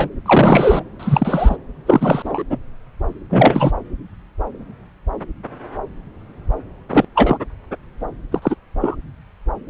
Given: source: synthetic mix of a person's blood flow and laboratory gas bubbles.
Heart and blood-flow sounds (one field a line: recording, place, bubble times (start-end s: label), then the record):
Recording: Doppler ultrasound of blood flow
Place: subclavian vein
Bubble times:
0.00-0.09 s: bubbles
0.26-0.83 s: bubbles
0.99-1.56 s: bubbles
1.86-2.44 s: bubbles
2.50-2.57 s: bubbles
3.29-3.71 s: bubbles
6.89-7.05 s: bubbles
7.14-7.38 s: bubbles
8.31-8.39 s: bubbles
8.42-8.55 s: bubbles
8.80-8.96 s: bubbles
From the record:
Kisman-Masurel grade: 223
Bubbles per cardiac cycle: several, 3 to 8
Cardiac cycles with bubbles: 10 to 50%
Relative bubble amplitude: loud (0.450 to 0.775)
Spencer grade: 2 (many but less than half of the cardiac periods contain bubble signals, singularly or in groups)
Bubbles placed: anywhere in the cardiac cycle